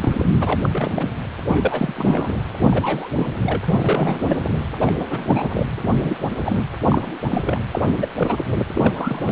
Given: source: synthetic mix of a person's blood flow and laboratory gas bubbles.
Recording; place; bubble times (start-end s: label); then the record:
Doppler ultrasound of blood flow; precordium
0.00-1.09 s: bubbles
1.47-2.34 s: bubbles
2.58-3.10 s: bubbles
3.16-3.29 s: bubbles
3.42-4.39 s: bubbles
4.80-5.06 s: bubbles
5.10-5.65 s: bubbles
5.78-6.16 s: bubbles
6.38-6.63 s: bubbles
6.89-7.15 s: bubbles
7.28-7.59 s: bubbles
7.71-7.94 s: bubbles
7.97-8.06 s: bubbles
8.17-8.45 s: bubbles
8.74-9.32 s: bubbles
From the record:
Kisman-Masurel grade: 342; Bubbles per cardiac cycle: rolling drumbeat, 9 or more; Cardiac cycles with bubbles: 100%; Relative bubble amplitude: moderate (0.250 to 0.450); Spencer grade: 3 (all of the cardiac periods contain showers or single bubble signals, but not dominating or overriding the cardiac motion signals); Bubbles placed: anywhere in the cardiac cycle